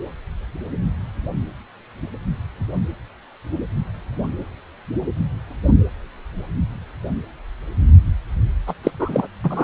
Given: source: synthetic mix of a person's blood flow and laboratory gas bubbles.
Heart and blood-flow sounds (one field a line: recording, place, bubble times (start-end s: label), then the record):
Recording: Doppler ultrasound of blood flow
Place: precordium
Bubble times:
8.67-8.75 s: bubbles
8.83-8.91 s: bubbles
8.99-9.27 s: bubbles
9.44-9.64 s: bubbles
From the record:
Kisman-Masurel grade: 223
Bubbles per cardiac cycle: several, 3 to 8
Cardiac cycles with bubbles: 10 to 50%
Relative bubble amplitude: loud (0.450 to 0.775)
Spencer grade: 2 (many but less than half of the cardiac periods contain bubble signals, singularly or in groups)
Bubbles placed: anywhere in the cardiac cycle